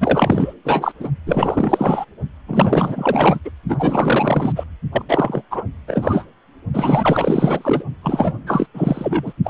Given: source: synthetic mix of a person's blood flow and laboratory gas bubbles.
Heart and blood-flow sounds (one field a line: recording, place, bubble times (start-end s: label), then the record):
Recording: Doppler ultrasound of blood flow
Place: precordium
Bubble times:
0.00-0.53 s: bubbles
0.65-0.93 s: bubbles
1.00-1.08 s: bubbles
1.26-2.05 s: bubbles
2.46-3.40 s: bubbles
3.45-3.50 s: bubbles
3.68-4.52 s: bubbles
4.55-4.64 s: bubbles
4.92-5.03 s: bubbles
5.08-5.42 s: bubbles
5.50-5.64 s: bubbles
5.87-6.25 s: bubbles
6.74-7.84 s: bubbles
8.03-8.34 s: bubbles
8.46-8.67 s: bubbles
8.74-9.32 s: bubbles
9.44-9.50 s: bubbles
From the record:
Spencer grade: 4 (maximum detectable bubble signal sounding continuously throughout systole and diastole of every cardiac period, and overriding the amplitude of the normal cardiac signals)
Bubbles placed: only in the low amplitude regions of the cardiac cycle